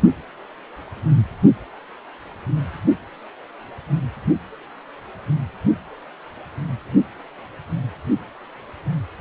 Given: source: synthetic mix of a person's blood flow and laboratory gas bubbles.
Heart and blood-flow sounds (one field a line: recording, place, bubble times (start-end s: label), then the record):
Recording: Doppler ultrasound of blood flow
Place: precordium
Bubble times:
no bubbles
From the record:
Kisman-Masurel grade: 000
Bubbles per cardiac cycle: 0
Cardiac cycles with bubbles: 0%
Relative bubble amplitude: no bubbles discernible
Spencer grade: 0 (complete lack of bubble signals)